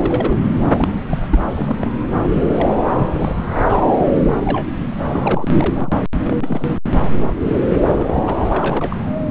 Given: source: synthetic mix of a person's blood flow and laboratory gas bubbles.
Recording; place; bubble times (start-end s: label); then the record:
Doppler ultrasound of blood flow; subclavian vein
0.00-0.39 s: bubbles
0.71-1.38 s: bubbles
1.50-1.76 s: bubbles
1.81-1.90 s: bubbles
2.27-2.75 s: bubbles
2.92-3.37 s: bubbles
3.58-3.89 s: bubbles
3.99-4.06 s: bubbles
4.32-4.70 s: bubbles
4.74-4.91 s: bubbles
5.07-5.49 s: bubbles
5.59-6.03 s: bubbles
6.28-6.74 s: bubbles
7.04-7.12 s: bubbles
7.40-7.81 s: bubbles
7.86-8.34 s: bubbles
8.49-8.96 s: bubbles
From the record:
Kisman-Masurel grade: 242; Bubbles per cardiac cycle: several, 3 to 8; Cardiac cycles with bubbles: 100%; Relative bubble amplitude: moderate (0.250 to 0.450); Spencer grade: 3 (all of the cardiac periods contain showers or single bubble signals, but not dominating or overriding the cardiac motion signals); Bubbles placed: anywhere in the cardiac cycle